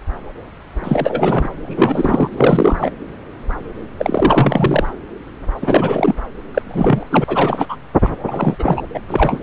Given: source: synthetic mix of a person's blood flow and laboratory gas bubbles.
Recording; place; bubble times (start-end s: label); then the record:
Doppler ultrasound of blood flow; subclavian vein
0.83-1.49 s: bubbles
1.62-2.91 s: bubbles
3.99-4.89 s: bubbles
5.62-6.13 s: bubbles
6.54-7.05 s: bubbles
7.10-7.24 s: bubbles
7.27-7.77 s: bubbles
8.03-8.09 s: bubbles
8.27-8.55 s: bubbles
8.59-8.82 s: bubbles
8.94-9.00 s: bubbles
9.07-9.39 s: bubbles
From the record:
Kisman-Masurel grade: 333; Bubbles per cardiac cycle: rolling drumbeat, 9 or more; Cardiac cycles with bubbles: 50 to 99%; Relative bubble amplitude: loud (0.450 to 0.775); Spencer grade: 3 (all of the cardiac periods contain showers or single bubble signals, but not dominating or overriding the cardiac motion signals); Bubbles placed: anywhere in the cardiac cycle